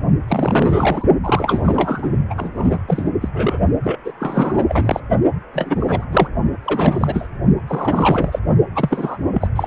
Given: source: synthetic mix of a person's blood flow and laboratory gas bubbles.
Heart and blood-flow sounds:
Doppler ultrasound of blood flow; precordium
0.27-1.05 s: bubbles
1.23-2.10 s: bubbles
2.30-2.79 s: bubbles
2.88-3.12 s: bubbles
3.21-3.29 s: bubbles
3.33-3.59 s: bubbles
3.83-3.99 s: bubbles
4.04-4.12 s: bubbles
4.19-5.00 s: bubbles
5.54-6.05 s: bubbles
6.12-6.28 s: bubbles
6.62-7.28 s: bubbles
7.67-8.39 s: bubbles
8.75-9.18 s: bubbles
9.34-9.49 s: bubbles
9.56-9.67 s: bubbles
From the record:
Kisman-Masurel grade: 343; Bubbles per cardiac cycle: rolling drumbeat, 9 or more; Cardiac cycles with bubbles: 100%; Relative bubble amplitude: loud (0.450 to 0.775); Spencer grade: 3 (all of the cardiac periods contain showers or single bubble signals, but not dominating or overriding the cardiac motion signals); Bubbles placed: only in the low amplitude regions of the cardiac cycle

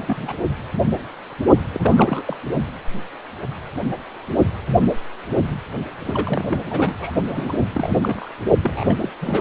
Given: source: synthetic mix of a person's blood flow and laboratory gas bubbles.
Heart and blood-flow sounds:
Doppler ultrasound of blood flow; precordium
0.00-0.36 s: bubbles
1.72-2.23 s: bubbles
2.27-2.37 s: bubbles
6.05-6.61 s: bubbles
6.66-6.95 s: bubbles
7.00-7.12 s: bubbles
7.28-7.53 s: bubbles
7.75-7.98 s: bubbles
8.02-8.30 s: bubbles
8.63-9.11 s: bubbles
9.21-9.41 s: bubbles
From the record:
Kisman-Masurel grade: 332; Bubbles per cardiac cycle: rolling drumbeat, 9 or more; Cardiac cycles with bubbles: 50 to 99%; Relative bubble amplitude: moderate (0.250 to 0.450); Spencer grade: 3 (all of the cardiac periods contain showers or single bubble signals, but not dominating or overriding the cardiac motion signals); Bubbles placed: only in the low amplitude regions of the cardiac cycle

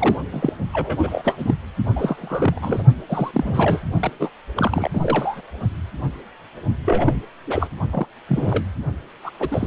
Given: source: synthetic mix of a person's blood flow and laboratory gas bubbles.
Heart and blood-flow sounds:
Doppler ultrasound of blood flow; precordium
0.00-0.16 s: bubbles
0.32-0.51 s: bubbles
0.72-1.54 s: bubbles
1.96-2.83 s: bubbles
3.08-3.31 s: bubbles
3.33-3.82 s: bubbles
4.00-4.11 s: bubbles
4.20-4.30 s: bubbles
4.56-4.91 s: bubbles
4.93-5.41 s: bubbles
6.85-7.23 s: bubbles
7.47-7.68 s: bubbles
7.92-8.06 s: bubbles
8.29-8.64 s: bubbles
9.24-9.30 s: bubbles
9.39-9.49 s: bubbles
9.51-9.67 s: bubbles
From the record:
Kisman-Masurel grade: 332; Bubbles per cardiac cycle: rolling drumbeat, 9 or more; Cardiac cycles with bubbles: 50 to 99%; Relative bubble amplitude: moderate (0.250 to 0.450); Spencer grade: 3 (all of the cardiac periods contain showers or single bubble signals, but not dominating or overriding the cardiac motion signals); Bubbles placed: only in the low amplitude regions of the cardiac cycle

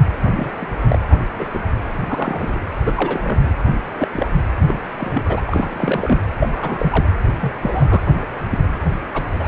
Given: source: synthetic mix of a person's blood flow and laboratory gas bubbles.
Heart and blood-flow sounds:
Doppler ultrasound of blood flow; precordium
0.24-0.74 s: bubbles
0.89-0.98 s: bubbles
1.10-1.17 s: bubbles
1.38-1.49 s: bubbles
1.54-1.60 s: bubbles
1.90-2.58 s: bubbles
2.85-2.93 s: bubbles
2.96-3.48 s: bubbles
3.65-3.75 s: bubbles
3.99-4.08 s: bubbles
4.12-4.31 s: bubbles
4.67-4.83 s: bubbles
4.98-5.40 s: bubbles
5.47-6.18 s: bubbles
6.40-7.08 s: bubbles
7.41-7.57 s: bubbles
7.61-8.02 s: bubbles
8.50-8.58 s: bubbles
9.13-9.22 s: bubbles
9.39-9.48 s: bubbles
From the record:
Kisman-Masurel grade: 242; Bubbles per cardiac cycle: several, 3 to 8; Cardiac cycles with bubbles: 100%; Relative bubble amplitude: moderate (0.250 to 0.450); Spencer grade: 3 (all of the cardiac periods contain showers or single bubble signals, but not dominating or overriding the cardiac motion signals); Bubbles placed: anywhere in the cardiac cycle

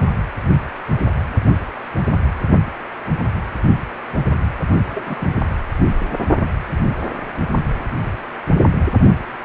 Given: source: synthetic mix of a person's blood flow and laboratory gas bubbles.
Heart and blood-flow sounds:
Doppler ultrasound of blood flow; precordium
4.89-5.27 s: bubbles
From the record:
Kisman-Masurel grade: 211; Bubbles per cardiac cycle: several, 3 to 8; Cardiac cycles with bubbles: 1 to 10%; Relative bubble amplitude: barely perceptible (0.100 to 0.250); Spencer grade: 1 (occasional bubble signal discernible with the cardiac motion signal, with majority of cardiac periods free of bubbles); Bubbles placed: only in the low amplitude regions of the cardiac cycle

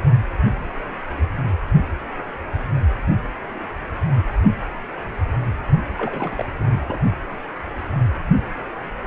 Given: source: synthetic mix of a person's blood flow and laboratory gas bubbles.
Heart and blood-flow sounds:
Doppler ultrasound of blood flow; precordium
5.97-6.43 s: bubbles
6.58-6.97 s: bubbles
From the record:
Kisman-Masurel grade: 221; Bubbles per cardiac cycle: several, 3 to 8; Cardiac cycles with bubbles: 10 to 50%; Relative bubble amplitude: barely perceptible (0.100 to 0.250); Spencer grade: 2 (many but less than half of the cardiac periods contain bubble signals, singularly or in groups); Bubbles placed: only in the low amplitude regions of the cardiac cycle

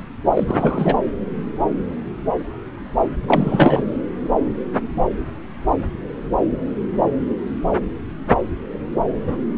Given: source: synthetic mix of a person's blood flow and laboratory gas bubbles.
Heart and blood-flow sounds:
Doppler ultrasound of blood flow; subclavian vein
0.33-0.96 s: bubbles
3.27-3.83 s: bubbles
From the record:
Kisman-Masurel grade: 213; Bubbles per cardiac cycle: several, 3 to 8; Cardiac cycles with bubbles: 1 to 10%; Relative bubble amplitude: loud (0.450 to 0.775); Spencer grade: 1 (occasional bubble signal discernible with the cardiac motion signal, with majority of cardiac periods free of bubbles); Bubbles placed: anywhere in the cardiac cycle

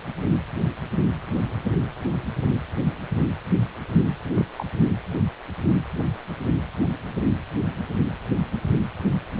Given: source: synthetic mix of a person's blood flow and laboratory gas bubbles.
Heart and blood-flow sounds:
Doppler ultrasound of blood flow; precordium
4.34-4.45 s: bubbles
4.57-4.65 s: bubbles
From the record:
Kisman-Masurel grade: 111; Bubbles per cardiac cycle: 1 to 2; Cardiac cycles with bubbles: 1 to 10%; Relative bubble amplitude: barely perceptible (0.100 to 0.250); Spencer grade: 1 (occasional bubble signal discernible with the cardiac motion signal, with majority of cardiac periods free of bubbles); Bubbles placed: anywhere in the cardiac cycle

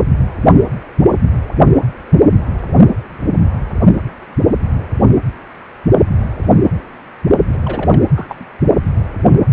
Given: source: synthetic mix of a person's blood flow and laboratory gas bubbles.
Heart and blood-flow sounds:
Doppler ultrasound of blood flow; precordium
7.53-7.58 s: bubbles
7.65-8.02 s: bubbles
8.15-8.35 s: bubbles
8.39-8.45 s: bubbles
From the record:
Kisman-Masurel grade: 211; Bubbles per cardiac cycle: several, 3 to 8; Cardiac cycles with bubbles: 1 to 10%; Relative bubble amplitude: barely perceptible (0.100 to 0.250); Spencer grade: 1 (occasional bubble signal discernible with the cardiac motion signal, with majority of cardiac periods free of bubbles); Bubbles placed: only in the low amplitude regions of the cardiac cycle

